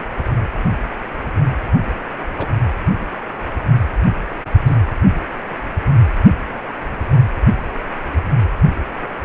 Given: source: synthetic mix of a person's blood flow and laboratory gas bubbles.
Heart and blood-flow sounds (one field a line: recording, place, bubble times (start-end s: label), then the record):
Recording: Doppler ultrasound of blood flow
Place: precordium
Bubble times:
0.00-0.03 s: bubbles
2.38-2.47 s: bubbles
4.65-4.76 s: bubbles
From the record:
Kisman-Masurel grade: 122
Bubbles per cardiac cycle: 1 to 2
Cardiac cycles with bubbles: 10 to 50%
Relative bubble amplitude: moderate (0.250 to 0.450)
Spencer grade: 2 (many but less than half of the cardiac periods contain bubble signals, singularly or in groups)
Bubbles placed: anywhere in the cardiac cycle